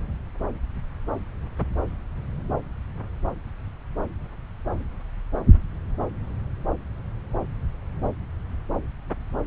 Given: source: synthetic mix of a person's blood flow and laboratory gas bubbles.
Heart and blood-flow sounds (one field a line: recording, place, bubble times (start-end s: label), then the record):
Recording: Doppler ultrasound of blood flow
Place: subclavian vein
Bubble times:
no bubbles
From the record:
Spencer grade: 0 (complete lack of bubble signals)